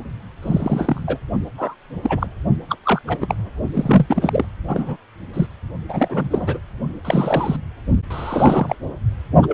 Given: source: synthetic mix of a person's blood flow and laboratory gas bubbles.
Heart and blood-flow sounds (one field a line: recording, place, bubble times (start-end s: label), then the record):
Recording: Doppler ultrasound of blood flow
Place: precordium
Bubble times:
0.42-1.17 s: bubbles
1.58-1.75 s: bubbles
2.02-2.27 s: bubbles
2.69-2.77 s: bubbles
2.83-3.02 s: bubbles
3.07-3.35 s: bubbles
3.75-4.46 s: bubbles
4.67-4.96 s: bubbles
5.33-5.46 s: bubbles
5.88-6.59 s: bubbles
7.04-7.57 s: bubbles
8.10-8.75 s: bubbles
9.42-9.54 s: bubbles
From the record:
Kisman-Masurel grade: 242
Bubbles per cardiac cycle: several, 3 to 8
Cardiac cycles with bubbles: 100%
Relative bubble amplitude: moderate (0.250 to 0.450)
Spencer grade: 3 (all of the cardiac periods contain showers or single bubble signals, but not dominating or overriding the cardiac motion signals)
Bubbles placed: only in the low amplitude regions of the cardiac cycle